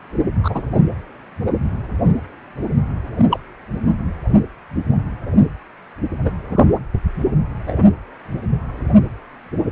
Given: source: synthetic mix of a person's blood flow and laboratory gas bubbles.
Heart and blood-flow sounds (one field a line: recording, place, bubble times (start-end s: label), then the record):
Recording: Doppler ultrasound of blood flow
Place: precordium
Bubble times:
0.42-0.62 s: bubbles
3.18-3.26 s: bubbles
3.31-3.40 s: bubbles
6.24-6.31 s: bubbles
6.50-6.65 s: bubbles
7.67-7.84 s: bubbles
From the record:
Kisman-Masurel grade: 122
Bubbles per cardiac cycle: 1 to 2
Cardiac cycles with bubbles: 10 to 50%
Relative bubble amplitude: moderate (0.250 to 0.450)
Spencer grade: 2 (many but less than half of the cardiac periods contain bubble signals, singularly or in groups)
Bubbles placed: anywhere in the cardiac cycle